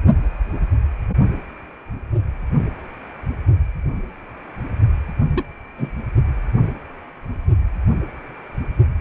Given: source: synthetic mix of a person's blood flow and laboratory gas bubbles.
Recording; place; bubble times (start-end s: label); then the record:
Doppler ultrasound of blood flow; precordium
5.35-5.43 s: bubbles
5.76-5.91 s: bubbles
From the record:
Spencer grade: 1 (occasional bubble signal discernible with the cardiac motion signal, with majority of cardiac periods free of bubbles); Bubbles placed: only in the low amplitude regions of the cardiac cycle